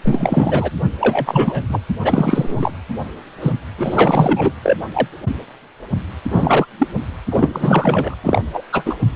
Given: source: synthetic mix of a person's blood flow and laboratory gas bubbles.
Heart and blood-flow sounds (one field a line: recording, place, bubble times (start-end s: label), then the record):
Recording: Doppler ultrasound of blood flow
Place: precordium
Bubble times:
0.04-0.70 s: bubbles
0.99-1.63 s: bubbles
1.69-1.79 s: bubbles
2.02-2.72 s: bubbles
3.40-3.52 s: bubbles
3.77-4.52 s: bubbles
4.62-4.76 s: bubbles
4.93-5.08 s: bubbles
6.29-6.65 s: bubbles
6.79-6.88 s: bubbles
7.30-8.16 s: bubbles
8.23-8.43 s: bubbles
8.53-8.63 s: bubbles
8.72-8.95 s: bubbles
From the record:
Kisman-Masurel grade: 333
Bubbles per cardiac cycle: rolling drumbeat, 9 or more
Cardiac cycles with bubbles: 50 to 99%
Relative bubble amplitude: loud (0.450 to 0.775)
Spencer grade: 3 (all of the cardiac periods contain showers or single bubble signals, but not dominating or overriding the cardiac motion signals)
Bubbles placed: anywhere in the cardiac cycle